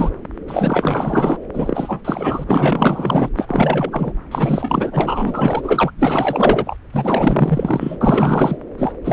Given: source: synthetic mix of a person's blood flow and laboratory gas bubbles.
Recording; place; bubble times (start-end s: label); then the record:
Doppler ultrasound of blood flow; subclavian vein
0.00-0.10 s: bubbles
0.47-1.38 s: bubbles
1.53-2.01 s: bubbles
2.04-2.45 s: bubbles
2.47-3.29 s: bubbles
3.37-4.13 s: bubbles
4.31-5.92 s: bubbles
5.98-6.76 s: bubbles
6.92-7.96 s: bubbles
8.01-8.57 s: bubbles
8.78-8.92 s: bubbles
9.04-9.13 s: bubbles
From the record:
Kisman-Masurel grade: 444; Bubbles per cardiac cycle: continuous sound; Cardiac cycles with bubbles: 100%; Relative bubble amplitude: maximal (0.775 to 0.999); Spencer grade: 4 (maximum detectable bubble signal sounding continuously throughout systole and diastole of every cardiac period, and overriding the amplitude of the normal cardiac signals); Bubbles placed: anywhere in the cardiac cycle